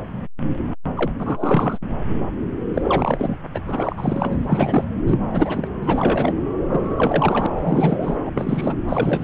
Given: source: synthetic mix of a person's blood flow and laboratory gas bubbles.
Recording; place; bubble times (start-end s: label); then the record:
Doppler ultrasound of blood flow; subclavian vein
0.96-1.11 s: bubbles
1.18-1.78 s: bubbles
2.74-3.36 s: bubbles
3.54-3.60 s: bubbles
3.65-4.85 s: bubbles
5.07-5.20 s: bubbles
5.31-5.67 s: bubbles
5.83-6.33 s: bubbles
6.71-7.46 s: bubbles
7.56-8.18 s: bubbles
8.25-8.31 s: bubbles
8.34-8.75 s: bubbles
8.88-9.24 s: bubbles
From the record:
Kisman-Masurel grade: 333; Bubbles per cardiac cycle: rolling drumbeat, 9 or more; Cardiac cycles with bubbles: 50 to 99%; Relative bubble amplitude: loud (0.450 to 0.775); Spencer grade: 3 (all of the cardiac periods contain showers or single bubble signals, but not dominating or overriding the cardiac motion signals); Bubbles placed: anywhere in the cardiac cycle